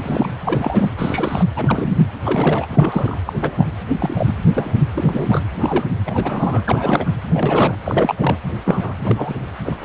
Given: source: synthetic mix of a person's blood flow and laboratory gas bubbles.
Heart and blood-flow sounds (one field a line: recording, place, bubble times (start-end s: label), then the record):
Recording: Doppler ultrasound of blood flow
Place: precordium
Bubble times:
0.03-0.29 s: bubbles
0.43-0.89 s: bubbles
0.97-1.45 s: bubbles
1.56-2.07 s: bubbles
2.25-2.66 s: bubbles
2.71-3.19 s: bubbles
3.26-3.33 s: bubbles
3.40-3.65 s: bubbles
3.99-4.37 s: bubbles
4.54-4.80 s: bubbles
4.93-5.42 s: bubbles
5.55-5.92 s: bubbles
6.05-6.62 s: bubbles
6.66-7.10 s: bubbles
7.33-7.75 s: bubbles
7.84-8.15 s: bubbles
8.18-8.37 s: bubbles
8.65-8.94 s: bubbles
8.98-9.34 s: bubbles
9.65-9.76 s: bubbles
9.79-9.85 s: bubbles
From the record:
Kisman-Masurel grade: 242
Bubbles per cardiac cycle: several, 3 to 8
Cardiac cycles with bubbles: 100%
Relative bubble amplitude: moderate (0.250 to 0.450)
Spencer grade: 3 (all of the cardiac periods contain showers or single bubble signals, but not dominating or overriding the cardiac motion signals)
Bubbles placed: anywhere in the cardiac cycle